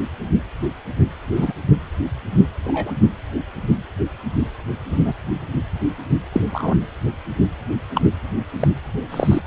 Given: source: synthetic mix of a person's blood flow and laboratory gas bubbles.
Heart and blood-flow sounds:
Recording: Doppler ultrasound of blood flow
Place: precordium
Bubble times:
1.35-1.53 s: bubbles
2.65-2.92 s: bubbles
4.89-5.14 s: bubbles
6.32-6.42 s: bubbles
6.52-6.75 s: bubbles
7.94-8.01 s: bubbles
8.61-8.68 s: bubbles
9.11-9.41 s: bubbles
From the record:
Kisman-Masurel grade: 123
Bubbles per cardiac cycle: 1 to 2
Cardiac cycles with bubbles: 10 to 50%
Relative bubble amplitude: loud (0.450 to 0.775)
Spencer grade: 2 (many but less than half of the cardiac periods contain bubble signals, singularly or in groups)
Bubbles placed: anywhere in the cardiac cycle

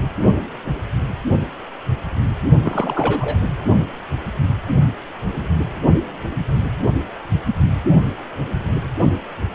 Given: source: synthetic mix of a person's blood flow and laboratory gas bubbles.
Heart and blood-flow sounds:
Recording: Doppler ultrasound of blood flow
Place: precordium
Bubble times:
2.62-3.37 s: bubbles
From the record:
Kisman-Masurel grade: 212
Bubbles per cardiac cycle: several, 3 to 8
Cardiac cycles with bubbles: 1 to 10%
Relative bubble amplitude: moderate (0.250 to 0.450)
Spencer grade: 1 (occasional bubble signal discernible with the cardiac motion signal, with majority of cardiac periods free of bubbles)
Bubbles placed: only in the low amplitude regions of the cardiac cycle

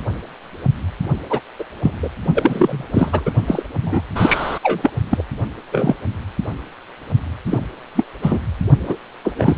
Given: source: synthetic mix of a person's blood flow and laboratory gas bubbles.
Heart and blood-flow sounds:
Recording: Doppler ultrasound of blood flow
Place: precordium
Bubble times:
1.29-1.40 s: bubbles
1.59-1.65 s: bubbles
1.82-1.92 s: bubbles
2.02-2.09 s: bubbles
2.34-2.83 s: bubbles
2.94-3.32 s: bubbles
3.47-3.63 s: bubbles
3.82-4.02 s: bubbles
4.15-4.59 s: bubbles
4.62-4.91 s: bubbles
5.11-5.24 s: bubbles
5.72-5.96 s: bubbles
7.45-7.62 s: bubbles
7.95-8.04 s: bubbles
8.22-8.38 s: bubbles
8.87-8.97 s: bubbles
9.25-9.34 s: bubbles
9.38-9.57 s: bubbles
From the record:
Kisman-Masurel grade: 233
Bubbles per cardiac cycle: several, 3 to 8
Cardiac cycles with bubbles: 50 to 99%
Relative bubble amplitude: loud (0.450 to 0.775)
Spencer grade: 3 (all of the cardiac periods contain showers or single bubble signals, but not dominating or overriding the cardiac motion signals)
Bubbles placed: only in the low amplitude regions of the cardiac cycle

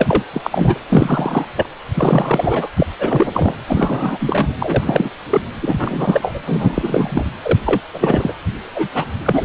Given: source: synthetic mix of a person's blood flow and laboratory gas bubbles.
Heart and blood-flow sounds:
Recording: Doppler ultrasound of blood flow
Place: precordium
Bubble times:
0.00-0.23 s: bubbles
0.33-0.79 s: bubbles
0.89-1.45 s: bubbles
1.56-1.67 s: bubbles
1.94-2.69 s: bubbles
2.77-2.87 s: bubbles
2.98-3.29 s: bubbles
3.33-3.54 s: bubbles
3.67-4.48 s: bubbles
4.58-5.10 s: bubbles
5.30-5.42 s: bubbles
5.60-6.40 s: bubbles
6.46-7.24 s: bubbles
7.42-7.59 s: bubbles
7.65-7.81 s: bubbles
7.94-8.33 s: bubbles
8.74-8.88 s: bubbles
8.94-9.05 s: bubbles
9.17-9.45 s: bubbles
From the record:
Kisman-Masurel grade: 333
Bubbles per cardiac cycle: rolling drumbeat, 9 or more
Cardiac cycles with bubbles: 50 to 99%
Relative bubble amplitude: loud (0.450 to 0.775)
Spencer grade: 3 (all of the cardiac periods contain showers or single bubble signals, but not dominating or overriding the cardiac motion signals)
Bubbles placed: anywhere in the cardiac cycle

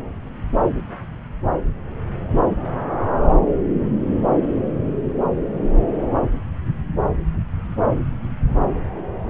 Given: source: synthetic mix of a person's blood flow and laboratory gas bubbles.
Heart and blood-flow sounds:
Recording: Doppler ultrasound of blood flow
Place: subclavian vein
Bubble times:
no bubbles
From the record:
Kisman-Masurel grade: 000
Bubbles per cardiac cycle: 0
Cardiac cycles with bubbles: 0%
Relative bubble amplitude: no bubbles discernible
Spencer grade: 0 (complete lack of bubble signals)

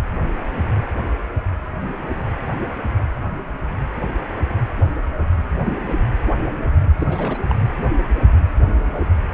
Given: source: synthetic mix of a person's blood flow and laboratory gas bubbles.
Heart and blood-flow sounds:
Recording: Doppler ultrasound of blood flow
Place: precordium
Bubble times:
6.99-7.38 s: bubbles
7.50-7.55 s: bubbles
From the record:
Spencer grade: 2 (many but less than half of the cardiac periods contain bubble signals, singularly or in groups)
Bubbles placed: anywhere in the cardiac cycle

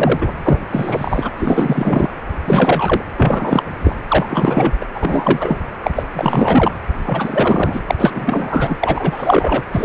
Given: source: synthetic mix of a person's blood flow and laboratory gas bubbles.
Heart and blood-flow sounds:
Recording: Doppler ultrasound of blood flow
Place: precordium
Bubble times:
0.00-0.32 s: bubbles
0.43-0.58 s: bubbles
0.71-1.30 s: bubbles
1.38-2.10 s: bubbles
2.46-3.03 s: bubbles
3.17-3.63 s: bubbles
3.83-3.95 s: bubbles
4.08-4.73 s: bubbles
4.81-4.85 s: bubbles
4.94-5.60 s: bubbles
5.83-5.91 s: bubbles
5.96-6.05 s: bubbles
6.13-6.72 s: bubbles
7.07-7.80 s: bubbles
7.87-7.95 s: bubbles
7.99-8.75 s: bubbles
8.79-9.63 s: bubbles
9.72-9.85 s: bubbles
From the record:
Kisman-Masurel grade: 343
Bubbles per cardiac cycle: rolling drumbeat, 9 or more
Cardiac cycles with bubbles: 100%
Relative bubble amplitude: loud (0.450 to 0.775)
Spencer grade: 3 (all of the cardiac periods contain showers or single bubble signals, but not dominating or overriding the cardiac motion signals)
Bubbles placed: anywhere in the cardiac cycle

